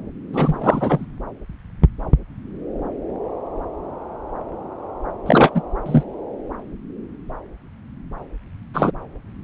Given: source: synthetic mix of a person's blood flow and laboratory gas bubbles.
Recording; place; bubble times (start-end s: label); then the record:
Doppler ultrasound of blood flow; subclavian vein
0.33-1.06 s: bubbles
5.25-5.52 s: bubbles
5.54-5.62 s: bubbles
5.86-6.04 s: bubbles
8.73-8.91 s: bubbles
From the record:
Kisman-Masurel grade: 223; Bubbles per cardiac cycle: several, 3 to 8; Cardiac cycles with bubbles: 10 to 50%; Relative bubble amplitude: loud (0.450 to 0.775); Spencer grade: 2 (many but less than half of the cardiac periods contain bubble signals, singularly or in groups); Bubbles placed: anywhere in the cardiac cycle